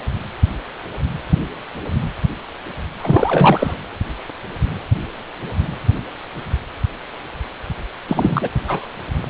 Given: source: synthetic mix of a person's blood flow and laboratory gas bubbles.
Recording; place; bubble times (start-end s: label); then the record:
Doppler ultrasound of blood flow; precordium
3.00-3.74 s: bubbles
8.08-8.48 s: bubbles
8.64-8.88 s: bubbles
From the record:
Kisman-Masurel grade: 223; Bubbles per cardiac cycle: several, 3 to 8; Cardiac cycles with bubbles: 10 to 50%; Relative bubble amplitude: loud (0.450 to 0.775); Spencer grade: 2 (many but less than half of the cardiac periods contain bubble signals, singularly or in groups); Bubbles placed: anywhere in the cardiac cycle